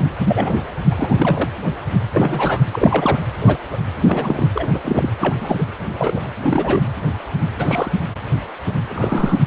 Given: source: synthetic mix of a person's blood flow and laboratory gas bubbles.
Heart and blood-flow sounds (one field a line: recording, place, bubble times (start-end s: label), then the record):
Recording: Doppler ultrasound of blood flow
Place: precordium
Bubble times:
0.27-0.66 s: bubbles
0.91-1.50 s: bubbles
2.12-2.62 s: bubbles
2.71-3.19 s: bubbles
3.38-3.58 s: bubbles
3.72-3.77 s: bubbles
4.04-4.48 s: bubbles
4.54-4.67 s: bubbles
4.73-4.79 s: bubbles
4.84-5.09 s: bubbles
5.20-5.35 s: bubbles
5.40-5.64 s: bubbles
5.97-6.21 s: bubbles
6.42-6.81 s: bubbles
7.58-7.92 s: bubbles
8.90-9.39 s: bubbles
From the record:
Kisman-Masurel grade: 233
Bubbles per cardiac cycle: several, 3 to 8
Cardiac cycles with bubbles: 50 to 99%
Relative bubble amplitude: loud (0.450 to 0.775)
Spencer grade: 3 (all of the cardiac periods contain showers or single bubble signals, but not dominating or overriding the cardiac motion signals)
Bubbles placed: anywhere in the cardiac cycle